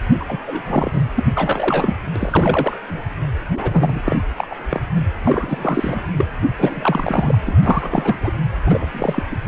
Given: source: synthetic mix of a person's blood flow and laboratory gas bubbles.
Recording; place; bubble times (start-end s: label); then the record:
Doppler ultrasound of blood flow; precordium
0.20-0.25 s: bubbles
0.28-0.38 s: bubbles
0.45-1.04 s: bubbles
1.16-1.25 s: bubbles
1.34-1.94 s: bubbles
2.15-2.77 s: bubbles
2.88-3.02 s: bubbles
3.54-4.01 s: bubbles
4.04-4.18 s: bubbles
4.37-4.47 s: bubbles
4.50-4.55 s: bubbles
4.70-4.80 s: bubbles
4.95-5.05 s: bubbles
5.24-6.04 s: bubbles
6.17-6.25 s: bubbles
6.42-6.48 s: bubbles
6.58-7.38 s: bubbles
7.46-7.57 s: bubbles
7.62-8.16 s: bubbles
8.20-8.30 s: bubbles
8.66-9.22 s: bubbles
9.30-9.36 s: bubbles
From the record:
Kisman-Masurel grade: 343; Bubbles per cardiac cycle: rolling drumbeat, 9 or more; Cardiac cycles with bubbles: 100%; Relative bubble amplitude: loud (0.450 to 0.775); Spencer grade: 3 (all of the cardiac periods contain showers or single bubble signals, but not dominating or overriding the cardiac motion signals); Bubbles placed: anywhere in the cardiac cycle